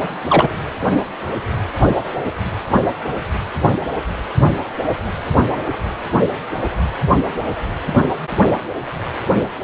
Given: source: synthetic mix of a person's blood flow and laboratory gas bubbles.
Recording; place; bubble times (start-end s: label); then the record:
Doppler ultrasound of blood flow; precordium
0.28-0.49 s: bubbles
From the record:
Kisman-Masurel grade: 213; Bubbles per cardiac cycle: several, 3 to 8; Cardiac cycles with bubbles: 1 to 10%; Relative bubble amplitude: loud (0.450 to 0.775); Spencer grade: 1 (occasional bubble signal discernible with the cardiac motion signal, with majority of cardiac periods free of bubbles); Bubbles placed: anywhere in the cardiac cycle